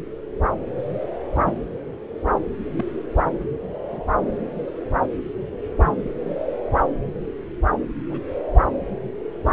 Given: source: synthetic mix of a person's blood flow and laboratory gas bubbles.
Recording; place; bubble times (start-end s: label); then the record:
Doppler ultrasound of blood flow; subclavian vein
1.43-1.55 s: bubbles
2.77-2.84 s: bubbles
3.87-4.03 s: bubbles
5.51-5.55 s: bubbles
5.81-5.91 s: bubbles
8.10-8.21 s: bubbles
8.61-8.66 s: bubbles
From the record:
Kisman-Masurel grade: 121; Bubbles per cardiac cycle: 1 to 2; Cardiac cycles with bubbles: 10 to 50%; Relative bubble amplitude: barely perceptible (0.100 to 0.250); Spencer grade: 2 (many but less than half of the cardiac periods contain bubble signals, singularly or in groups); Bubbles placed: anywhere in the cardiac cycle